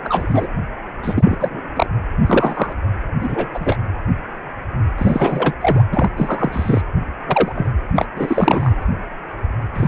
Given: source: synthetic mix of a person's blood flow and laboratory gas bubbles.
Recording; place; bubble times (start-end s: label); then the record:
Doppler ultrasound of blood flow; precordium
0.04-0.47 s: bubbles
1.02-1.61 s: bubbles
1.76-1.86 s: bubbles
2.26-2.73 s: bubbles
3.19-3.47 s: bubbles
3.54-3.77 s: bubbles
4.98-5.54 s: bubbles
5.61-5.84 s: bubbles
5.92-6.10 s: bubbles
6.17-6.83 s: bubbles
7.28-7.52 s: bubbles
7.55-7.72 s: bubbles
7.95-8.07 s: bubbles
8.15-8.85 s: bubbles
9.73-9.88 s: bubbles
From the record:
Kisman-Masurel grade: 233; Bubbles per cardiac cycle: several, 3 to 8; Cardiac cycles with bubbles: 50 to 99%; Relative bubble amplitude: loud (0.450 to 0.775); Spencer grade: 3 (all of the cardiac periods contain showers or single bubble signals, but not dominating or overriding the cardiac motion signals); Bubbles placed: anywhere in the cardiac cycle